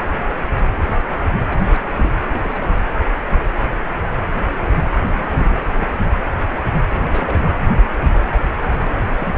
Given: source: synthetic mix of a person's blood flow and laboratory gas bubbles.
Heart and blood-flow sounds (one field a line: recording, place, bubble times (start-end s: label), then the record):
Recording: Doppler ultrasound of blood flow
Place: precordium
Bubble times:
1.50-1.59 s: bubbles
1.66-1.78 s: bubbles
1.84-1.94 s: bubbles
1.98-2.12 s: bubbles
2.33-2.71 s: bubbles
5.09-5.58 s: bubbles
5.73-6.12 s: bubbles
6.95-7.46 s: bubbles
8.81-8.94 s: bubbles
9.08-9.37 s: bubbles
From the record:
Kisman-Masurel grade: 221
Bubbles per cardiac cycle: several, 3 to 8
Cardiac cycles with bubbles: 10 to 50%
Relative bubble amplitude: barely perceptible (0.100 to 0.250)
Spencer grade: 2 (many but less than half of the cardiac periods contain bubble signals, singularly or in groups)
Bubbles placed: anywhere in the cardiac cycle